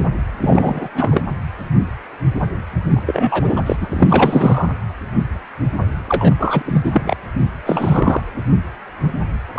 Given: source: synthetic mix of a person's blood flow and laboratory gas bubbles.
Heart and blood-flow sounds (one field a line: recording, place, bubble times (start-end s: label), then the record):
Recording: Doppler ultrasound of blood flow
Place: precordium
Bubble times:
0.41-0.88 s: bubbles
0.94-1.22 s: bubbles
2.91-3.02 s: bubbles
3.06-3.61 s: bubbles
3.66-3.76 s: bubbles
3.81-4.69 s: bubbles
6.08-6.34 s: bubbles
6.38-6.62 s: bubbles
6.65-7.16 s: bubbles
7.40-7.50 s: bubbles
7.65-8.21 s: bubbles
9.54-9.59 s: bubbles
From the record:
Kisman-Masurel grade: 333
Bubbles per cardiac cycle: rolling drumbeat, 9 or more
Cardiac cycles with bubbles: 50 to 99%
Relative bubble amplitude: loud (0.450 to 0.775)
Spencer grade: 3 (all of the cardiac periods contain showers or single bubble signals, but not dominating or overriding the cardiac motion signals)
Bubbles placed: anywhere in the cardiac cycle